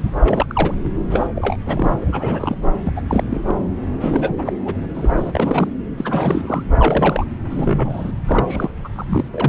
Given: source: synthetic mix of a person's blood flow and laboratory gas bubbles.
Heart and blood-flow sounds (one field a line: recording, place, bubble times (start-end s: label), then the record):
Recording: Doppler ultrasound of blood flow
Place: subclavian vein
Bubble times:
0.03-0.11 s: bubbles
0.20-0.74 s: bubbles
1.10-1.28 s: bubbles
1.35-1.57 s: bubbles
1.66-1.95 s: bubbles
2.00-2.57 s: bubbles
2.84-2.92 s: bubbles
2.96-3.02 s: bubbles
3.08-3.23 s: bubbles
3.29-3.41 s: bubbles
3.46-3.55 s: bubbles
3.90-4.34 s: bubbles
4.38-4.53 s: bubbles
4.66-4.75 s: bubbles
4.94-5.70 s: bubbles
5.98-6.63 s: bubbles
6.76-7.26 s: bubbles
7.50-8.13 s: bubbles
8.26-8.71 s: bubbles
8.84-8.88 s: bubbles
8.93-9.29 s: bubbles
9.31-9.49 s: bubbles
From the record:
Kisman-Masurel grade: 342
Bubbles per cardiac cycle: rolling drumbeat, 9 or more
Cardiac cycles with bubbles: 100%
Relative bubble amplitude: moderate (0.250 to 0.450)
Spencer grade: 3 (all of the cardiac periods contain showers or single bubble signals, but not dominating or overriding the cardiac motion signals)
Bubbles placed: anywhere in the cardiac cycle